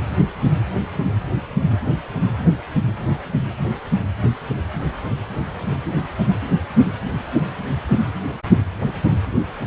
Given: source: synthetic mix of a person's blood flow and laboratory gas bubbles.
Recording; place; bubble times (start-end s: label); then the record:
Doppler ultrasound of blood flow; precordium
no bubbles
From the record:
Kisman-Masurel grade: 000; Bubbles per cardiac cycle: 0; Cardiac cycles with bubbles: 0%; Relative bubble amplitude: no bubbles discernible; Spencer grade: 0 (complete lack of bubble signals)